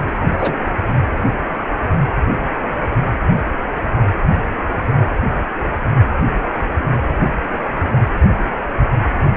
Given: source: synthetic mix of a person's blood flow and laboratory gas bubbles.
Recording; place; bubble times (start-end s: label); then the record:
Doppler ultrasound of blood flow; precordium
0.05-0.11 s: bubbles
0.33-0.57 s: bubbles
From the record:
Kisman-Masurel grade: 112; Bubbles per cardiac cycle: 1 to 2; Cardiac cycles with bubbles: 1 to 10%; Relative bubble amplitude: moderate (0.250 to 0.450); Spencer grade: 1 (occasional bubble signal discernible with the cardiac motion signal, with majority of cardiac periods free of bubbles); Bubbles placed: anywhere in the cardiac cycle